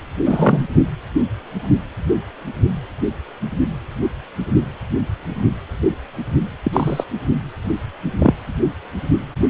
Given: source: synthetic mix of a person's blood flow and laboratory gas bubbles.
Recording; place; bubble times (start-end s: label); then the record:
Doppler ultrasound of blood flow; precordium
0.25-0.67 s: bubbles
6.63-7.04 s: bubbles
8.19-8.34 s: bubbles
From the record:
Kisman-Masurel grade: 123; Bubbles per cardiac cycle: 1 to 2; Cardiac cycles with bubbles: 10 to 50%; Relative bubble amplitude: loud (0.450 to 0.775); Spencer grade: 2 (many but less than half of the cardiac periods contain bubble signals, singularly or in groups); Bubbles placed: anywhere in the cardiac cycle